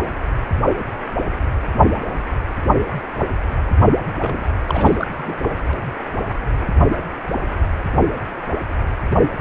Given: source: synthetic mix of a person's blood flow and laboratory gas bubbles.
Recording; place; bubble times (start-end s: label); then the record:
Doppler ultrasound of blood flow; precordium
4.21-4.45 s: bubbles
4.67-5.07 s: bubbles
5.17-5.35 s: bubbles
5.50-5.54 s: bubbles
From the record:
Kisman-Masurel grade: 212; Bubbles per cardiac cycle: several, 3 to 8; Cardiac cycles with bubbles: 1 to 10%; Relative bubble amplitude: moderate (0.250 to 0.450); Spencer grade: 1 (occasional bubble signal discernible with the cardiac motion signal, with majority of cardiac periods free of bubbles); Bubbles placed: only in the low amplitude regions of the cardiac cycle